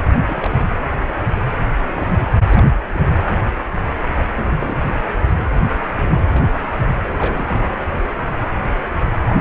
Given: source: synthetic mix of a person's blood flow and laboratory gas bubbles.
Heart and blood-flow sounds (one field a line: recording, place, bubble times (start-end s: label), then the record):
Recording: Doppler ultrasound of blood flow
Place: precordium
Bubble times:
0.04-0.75 s: bubbles
1.97-2.32 s: bubbles
2.49-2.66 s: bubbles
2.94-3.00 s: bubbles
4.33-4.81 s: bubbles
5.58-5.82 s: bubbles
5.95-6.29 s: bubbles
6.32-6.46 s: bubbles
7.12-7.78 s: bubbles
9.29-9.41 s: bubbles
From the record:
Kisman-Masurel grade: 221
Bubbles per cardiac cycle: several, 3 to 8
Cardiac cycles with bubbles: 10 to 50%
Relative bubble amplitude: barely perceptible (0.100 to 0.250)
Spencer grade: 2 (many but less than half of the cardiac periods contain bubble signals, singularly or in groups)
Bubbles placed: anywhere in the cardiac cycle